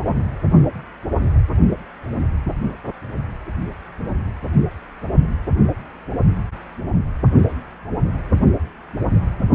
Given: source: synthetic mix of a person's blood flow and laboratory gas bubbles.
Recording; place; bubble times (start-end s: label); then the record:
Doppler ultrasound of blood flow; precordium
0.05-0.16 s: bubbles
From the record:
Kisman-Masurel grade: 111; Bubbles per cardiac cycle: 1 to 2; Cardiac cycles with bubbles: 1 to 10%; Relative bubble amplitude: barely perceptible (0.100 to 0.250); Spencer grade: 1 (occasional bubble signal discernible with the cardiac motion signal, with majority of cardiac periods free of bubbles); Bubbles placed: only in the low amplitude regions of the cardiac cycle